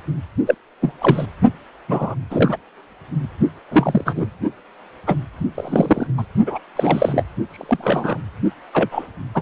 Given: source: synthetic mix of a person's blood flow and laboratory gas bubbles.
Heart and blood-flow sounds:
Doppler ultrasound of blood flow; precordium
0.46-0.55 s: bubbles
0.81-0.91 s: bubbles
1.00-1.25 s: bubbles
1.88-2.15 s: bubbles
2.31-2.56 s: bubbles
3.71-4.27 s: bubbles
5.07-5.16 s: bubbles
5.54-6.08 s: bubbles
6.17-6.24 s: bubbles
6.46-6.58 s: bubbles
6.75-7.24 s: bubbles
7.50-8.18 s: bubbles
8.73-9.07 s: bubbles
9.34-9.41 s: bubbles
From the record:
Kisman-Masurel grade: 233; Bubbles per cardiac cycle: several, 3 to 8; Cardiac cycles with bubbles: 50 to 99%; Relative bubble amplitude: loud (0.450 to 0.775); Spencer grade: 3 (all of the cardiac periods contain showers or single bubble signals, but not dominating or overriding the cardiac motion signals); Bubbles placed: only in the low amplitude regions of the cardiac cycle

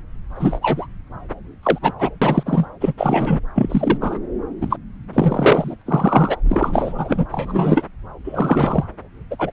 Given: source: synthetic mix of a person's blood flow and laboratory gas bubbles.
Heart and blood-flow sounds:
Doppler ultrasound of blood flow; subclavian vein
0.35-0.86 s: bubbles
1.62-1.79 s: bubbles
1.81-1.93 s: bubbles
1.98-2.10 s: bubbles
2.21-2.68 s: bubbles
2.81-2.93 s: bubbles
2.97-3.40 s: bubbles
3.55-3.98 s: bubbles
4.01-4.20 s: bubbles
4.61-4.78 s: bubbles
5.13-5.76 s: bubbles
5.86-6.37 s: bubbles
6.49-7.25 s: bubbles
7.31-7.87 s: bubbles
8.24-8.84 s: bubbles
9.30-9.36 s: bubbles
9.38-9.51 s: bubbles
From the record:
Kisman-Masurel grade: 243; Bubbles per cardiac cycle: several, 3 to 8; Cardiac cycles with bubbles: 100%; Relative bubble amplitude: loud (0.450 to 0.775); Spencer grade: 3 (all of the cardiac periods contain showers or single bubble signals, but not dominating or overriding the cardiac motion signals); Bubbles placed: anywhere in the cardiac cycle

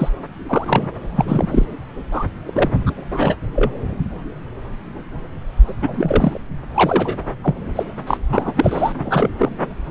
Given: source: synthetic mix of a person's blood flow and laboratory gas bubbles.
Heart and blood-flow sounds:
Doppler ultrasound of blood flow; subclavian vein
0.00-0.09 s: bubbles
0.48-0.89 s: bubbles
1.16-1.66 s: bubbles
2.11-2.25 s: bubbles
2.47-2.95 s: bubbles
3.11-3.35 s: bubbles
3.52-3.79 s: bubbles
5.68-5.73 s: bubbles
5.81-6.41 s: bubbles
6.74-7.17 s: bubbles
7.42-7.55 s: bubbles
7.75-7.84 s: bubbles
8.07-8.18 s: bubbles
8.29-8.93 s: bubbles
8.97-9.29 s: bubbles
9.38-9.52 s: bubbles
From the record:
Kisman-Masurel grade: 233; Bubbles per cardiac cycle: several, 3 to 8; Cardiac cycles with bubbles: 50 to 99%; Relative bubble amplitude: loud (0.450 to 0.775); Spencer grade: 3 (all of the cardiac periods contain showers or single bubble signals, but not dominating or overriding the cardiac motion signals); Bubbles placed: anywhere in the cardiac cycle

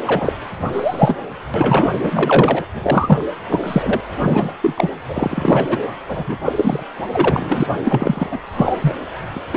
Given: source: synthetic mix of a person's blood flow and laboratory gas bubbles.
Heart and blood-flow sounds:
Doppler ultrasound of blood flow; precordium
0.05-0.33 s: bubbles
0.72-1.17 s: bubbles
1.54-1.92 s: bubbles
2.03-2.65 s: bubbles
2.73-3.25 s: bubbles
3.50-4.01 s: bubbles
4.19-4.53 s: bubbles
4.62-4.74 s: bubbles
4.76-4.91 s: bubbles
5.08-5.68 s: bubbles
5.70-5.81 s: bubbles
6.08-6.36 s: bubbles
6.45-6.53 s: bubbles
6.56-6.83 s: bubbles
7.12-7.67 s: bubbles
7.84-8.41 s: bubbles
8.53-8.95 s: bubbles
9.35-9.39 s: bubbles
9.53-9.57 s: bubbles
From the record:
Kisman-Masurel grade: 243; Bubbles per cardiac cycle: several, 3 to 8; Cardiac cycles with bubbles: 100%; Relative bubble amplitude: loud (0.450 to 0.775); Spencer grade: 3 (all of the cardiac periods contain showers or single bubble signals, but not dominating or overriding the cardiac motion signals); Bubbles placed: anywhere in the cardiac cycle

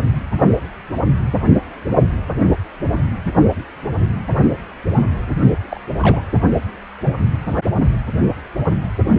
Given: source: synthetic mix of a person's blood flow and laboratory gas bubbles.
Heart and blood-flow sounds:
Doppler ultrasound of blood flow; precordium
5.71-5.80 s: bubbles
6.02-6.21 s: bubbles
From the record:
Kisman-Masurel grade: 112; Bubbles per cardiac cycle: 1 to 2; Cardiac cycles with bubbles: 1 to 10%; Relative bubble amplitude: moderate (0.250 to 0.450); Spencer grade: 1 (occasional bubble signal discernible with the cardiac motion signal, with majority of cardiac periods free of bubbles); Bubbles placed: only in the low amplitude regions of the cardiac cycle

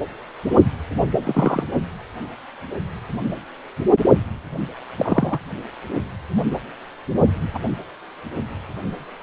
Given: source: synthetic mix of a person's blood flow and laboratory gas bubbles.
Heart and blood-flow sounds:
Doppler ultrasound of blood flow; precordium
1.24-1.64 s: bubbles
4.97-5.38 s: bubbles
7.54-7.59 s: bubbles
From the record:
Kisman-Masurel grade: 122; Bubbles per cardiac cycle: 1 to 2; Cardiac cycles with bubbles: 10 to 50%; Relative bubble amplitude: moderate (0.250 to 0.450); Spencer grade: 2 (many but less than half of the cardiac periods contain bubble signals, singularly or in groups); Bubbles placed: anywhere in the cardiac cycle

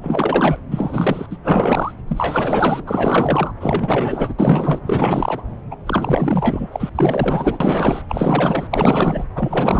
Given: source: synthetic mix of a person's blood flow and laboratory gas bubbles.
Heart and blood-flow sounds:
Doppler ultrasound of blood flow; subclavian vein
0.00-0.56 s: bubbles
0.71-1.26 s: bubbles
1.29-1.37 s: bubbles
1.44-1.92 s: bubbles
2.08-2.83 s: bubbles
2.87-3.52 s: bubbles
3.60-4.34 s: bubbles
4.38-4.80 s: bubbles
4.85-5.42 s: bubbles
5.71-5.76 s: bubbles
5.85-6.67 s: bubbles
6.72-6.90 s: bubbles
6.95-8.02 s: bubbles
8.09-8.67 s: bubbles
8.71-9.24 s: bubbles
9.35-9.80 s: bubbles
From the record:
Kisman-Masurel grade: 444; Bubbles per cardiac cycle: continuous sound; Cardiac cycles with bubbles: 100%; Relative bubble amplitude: maximal (0.775 to 0.999); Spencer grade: 4 (maximum detectable bubble signal sounding continuously throughout systole and diastole of every cardiac period, and overriding the amplitude of the normal cardiac signals); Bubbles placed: anywhere in the cardiac cycle

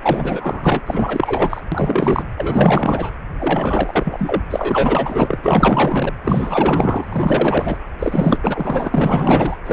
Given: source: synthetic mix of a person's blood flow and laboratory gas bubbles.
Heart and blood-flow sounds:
Doppler ultrasound of blood flow; precordium
0.03-0.81 s: bubbles
0.86-1.65 s: bubbles
1.72-2.23 s: bubbles
2.37-3.10 s: bubbles
3.39-4.42 s: bubbles
4.50-6.13 s: bubbles
6.23-7.77 s: bubbles
7.99-8.38 s: bubbles
8.44-9.57 s: bubbles
9.63-9.73 s: bubbles
From the record:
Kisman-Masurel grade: 444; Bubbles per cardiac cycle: continuous sound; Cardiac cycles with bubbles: 100%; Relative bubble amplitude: maximal (0.775 to 0.999); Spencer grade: 4 (maximum detectable bubble signal sounding continuously throughout systole and diastole of every cardiac period, and overriding the amplitude of the normal cardiac signals); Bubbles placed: anywhere in the cardiac cycle

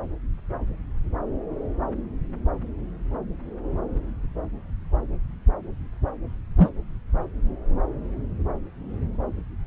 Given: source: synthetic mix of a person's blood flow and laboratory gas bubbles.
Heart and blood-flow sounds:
Doppler ultrasound of blood flow; subclavian vein
6.57-6.69 s: bubbles
From the record:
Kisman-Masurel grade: 113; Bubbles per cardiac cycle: 1 to 2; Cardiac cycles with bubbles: 1 to 10%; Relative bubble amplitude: loud (0.450 to 0.775); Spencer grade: 1 (occasional bubble signal discernible with the cardiac motion signal, with majority of cardiac periods free of bubbles); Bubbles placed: anywhere in the cardiac cycle

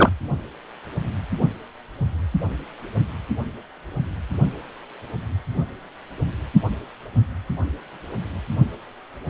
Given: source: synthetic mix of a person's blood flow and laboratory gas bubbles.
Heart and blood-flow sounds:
Doppler ultrasound of blood flow; precordium
0.00-0.10 s: bubbles
From the record:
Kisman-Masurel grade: 213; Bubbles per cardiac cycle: several, 3 to 8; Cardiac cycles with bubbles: 1 to 10%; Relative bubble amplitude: loud (0.450 to 0.775); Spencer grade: 1 (occasional bubble signal discernible with the cardiac motion signal, with majority of cardiac periods free of bubbles); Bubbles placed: anywhere in the cardiac cycle

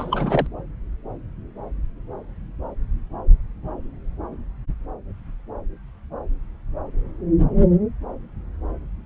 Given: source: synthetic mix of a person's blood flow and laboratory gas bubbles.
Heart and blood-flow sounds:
Doppler ultrasound of blood flow; subclavian vein
0.00-0.47 s: bubbles
From the record:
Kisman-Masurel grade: 212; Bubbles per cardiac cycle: several, 3 to 8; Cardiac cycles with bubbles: 1 to 10%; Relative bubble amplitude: moderate (0.250 to 0.450); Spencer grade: 1 (occasional bubble signal discernible with the cardiac motion signal, with majority of cardiac periods free of bubbles); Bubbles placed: anywhere in the cardiac cycle

